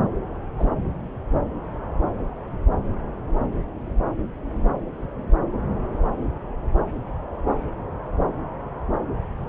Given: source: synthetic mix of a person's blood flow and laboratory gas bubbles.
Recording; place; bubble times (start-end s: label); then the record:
Doppler ultrasound of blood flow; subclavian vein
0.57-0.69 s: bubbles
From the record:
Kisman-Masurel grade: 121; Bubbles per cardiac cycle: 1 to 2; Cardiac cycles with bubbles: 10 to 50%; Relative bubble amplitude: barely perceptible (0.100 to 0.250); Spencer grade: 2 (many but less than half of the cardiac periods contain bubble signals, singularly or in groups); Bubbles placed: anywhere in the cardiac cycle